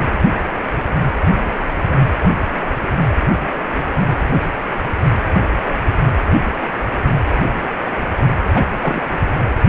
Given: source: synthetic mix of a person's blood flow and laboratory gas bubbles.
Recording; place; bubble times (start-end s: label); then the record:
Doppler ultrasound of blood flow; precordium
8.54-8.64 s: bubbles
8.80-9.01 s: bubbles
From the record:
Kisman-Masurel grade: 122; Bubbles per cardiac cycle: 1 to 2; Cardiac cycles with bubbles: 10 to 50%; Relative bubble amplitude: moderate (0.250 to 0.450); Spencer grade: 2 (many but less than half of the cardiac periods contain bubble signals, singularly or in groups); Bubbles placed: anywhere in the cardiac cycle